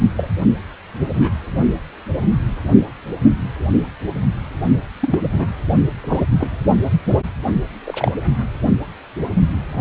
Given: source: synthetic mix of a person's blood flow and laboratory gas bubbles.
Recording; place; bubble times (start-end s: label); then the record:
Doppler ultrasound of blood flow; precordium
0.17-0.29 s: bubbles
0.99-1.32 s: bubbles
5.00-5.20 s: bubbles
5.31-5.46 s: bubbles
6.04-6.26 s: bubbles
6.39-6.55 s: bubbles
7.85-8.11 s: bubbles
From the record:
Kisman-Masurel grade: 122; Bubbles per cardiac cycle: 1 to 2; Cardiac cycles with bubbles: 10 to 50%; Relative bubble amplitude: moderate (0.250 to 0.450); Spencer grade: 2 (many but less than half of the cardiac periods contain bubble signals, singularly or in groups); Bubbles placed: only in the low amplitude regions of the cardiac cycle